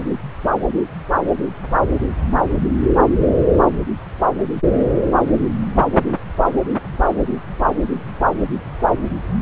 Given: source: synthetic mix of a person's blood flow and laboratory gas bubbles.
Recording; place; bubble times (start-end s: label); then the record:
Doppler ultrasound of blood flow; subclavian vein
no bubbles
From the record:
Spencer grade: 0 (complete lack of bubble signals)